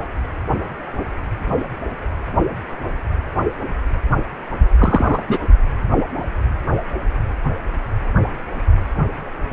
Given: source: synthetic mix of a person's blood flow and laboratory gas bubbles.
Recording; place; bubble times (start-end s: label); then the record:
Doppler ultrasound of blood flow; precordium
4.78-5.23 s: bubbles
5.27-5.39 s: bubbles
From the record:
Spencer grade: 1 (occasional bubble signal discernible with the cardiac motion signal, with majority of cardiac periods free of bubbles); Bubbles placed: only in the low amplitude regions of the cardiac cycle